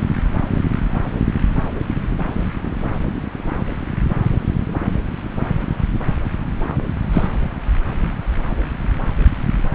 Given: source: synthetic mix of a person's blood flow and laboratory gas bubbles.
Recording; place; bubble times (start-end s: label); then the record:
Doppler ultrasound of blood flow; subclavian vein
7.13-7.27 s: bubbles
From the record:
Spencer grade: 1 (occasional bubble signal discernible with the cardiac motion signal, with majority of cardiac periods free of bubbles); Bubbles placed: anywhere in the cardiac cycle